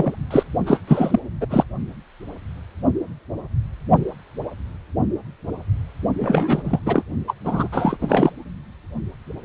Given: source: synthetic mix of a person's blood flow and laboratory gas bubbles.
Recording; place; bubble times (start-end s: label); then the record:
Doppler ultrasound of blood flow; precordium
0.00-0.16 s: bubbles
0.31-0.43 s: bubbles
0.66-0.80 s: bubbles
0.87-1.20 s: bubbles
1.41-1.47 s: bubbles
1.50-1.64 s: bubbles
6.18-6.79 s: bubbles
6.85-7.04 s: bubbles
7.27-7.33 s: bubbles
7.44-7.67 s: bubbles
7.72-7.97 s: bubbles
8.01-8.32 s: bubbles
From the record:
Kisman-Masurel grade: 333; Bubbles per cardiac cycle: rolling drumbeat, 9 or more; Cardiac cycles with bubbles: 50 to 99%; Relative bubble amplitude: loud (0.450 to 0.775); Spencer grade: 3 (all of the cardiac periods contain showers or single bubble signals, but not dominating or overriding the cardiac motion signals); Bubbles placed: only in the low amplitude regions of the cardiac cycle